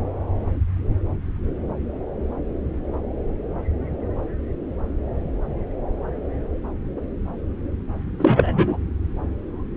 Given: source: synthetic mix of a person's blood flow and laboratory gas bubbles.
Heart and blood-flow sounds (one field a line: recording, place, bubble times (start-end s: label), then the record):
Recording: Doppler ultrasound of blood flow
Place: subclavian vein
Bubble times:
8.19-8.78 s: bubbles
From the record:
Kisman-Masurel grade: 213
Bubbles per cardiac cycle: several, 3 to 8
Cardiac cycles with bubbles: 1 to 10%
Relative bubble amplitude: loud (0.450 to 0.775)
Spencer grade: 1 (occasional bubble signal discernible with the cardiac motion signal, with majority of cardiac periods free of bubbles)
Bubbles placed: anywhere in the cardiac cycle